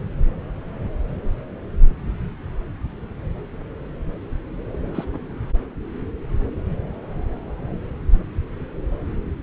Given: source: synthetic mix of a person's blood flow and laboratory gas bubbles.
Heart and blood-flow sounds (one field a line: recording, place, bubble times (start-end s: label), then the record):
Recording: Doppler ultrasound of blood flow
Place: subclavian vein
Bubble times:
4.95-5.05 s: bubbles
5.13-5.19 s: bubbles
From the record:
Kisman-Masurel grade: 111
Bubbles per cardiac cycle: 1 to 2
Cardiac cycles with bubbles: 1 to 10%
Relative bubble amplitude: barely perceptible (0.100 to 0.250)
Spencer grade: 1 (occasional bubble signal discernible with the cardiac motion signal, with majority of cardiac periods free of bubbles)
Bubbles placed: anywhere in the cardiac cycle